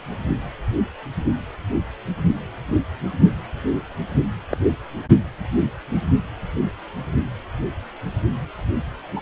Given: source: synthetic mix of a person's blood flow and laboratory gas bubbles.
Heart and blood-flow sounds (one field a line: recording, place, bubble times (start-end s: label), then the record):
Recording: Doppler ultrasound of blood flow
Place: precordium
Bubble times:
4.50-4.58 s: bubbles
9.16-9.21 s: bubbles
From the record:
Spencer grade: 2 (many but less than half of the cardiac periods contain bubble signals, singularly or in groups)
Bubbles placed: only in the low amplitude regions of the cardiac cycle